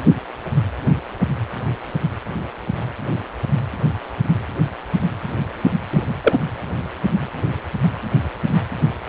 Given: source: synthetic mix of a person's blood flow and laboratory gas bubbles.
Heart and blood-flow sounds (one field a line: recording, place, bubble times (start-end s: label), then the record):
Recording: Doppler ultrasound of blood flow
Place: precordium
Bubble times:
5.90-6.03 s: bubbles
6.23-6.38 s: bubbles
From the record:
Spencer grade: 1 (occasional bubble signal discernible with the cardiac motion signal, with majority of cardiac periods free of bubbles)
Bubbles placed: anywhere in the cardiac cycle